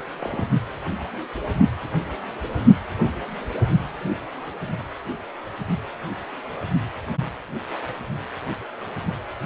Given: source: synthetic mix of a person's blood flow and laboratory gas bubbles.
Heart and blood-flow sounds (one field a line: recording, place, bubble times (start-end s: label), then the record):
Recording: Doppler ultrasound of blood flow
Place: precordium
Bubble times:
0.22-0.44 s: bubbles
From the record:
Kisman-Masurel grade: 111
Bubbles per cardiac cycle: 1 to 2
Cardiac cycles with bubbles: 1 to 10%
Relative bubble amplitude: barely perceptible (0.100 to 0.250)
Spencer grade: 1 (occasional bubble signal discernible with the cardiac motion signal, with majority of cardiac periods free of bubbles)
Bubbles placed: only in the low amplitude regions of the cardiac cycle